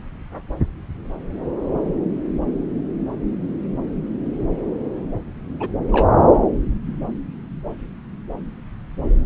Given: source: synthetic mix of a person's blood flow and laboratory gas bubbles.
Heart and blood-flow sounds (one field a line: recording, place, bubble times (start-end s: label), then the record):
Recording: Doppler ultrasound of blood flow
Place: subclavian vein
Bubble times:
5.59-5.68 s: bubbles
5.92-6.08 s: bubbles
From the record:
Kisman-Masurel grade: 112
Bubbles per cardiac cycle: 1 to 2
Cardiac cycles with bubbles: 1 to 10%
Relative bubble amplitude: moderate (0.250 to 0.450)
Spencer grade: 1 (occasional bubble signal discernible with the cardiac motion signal, with majority of cardiac periods free of bubbles)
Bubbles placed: anywhere in the cardiac cycle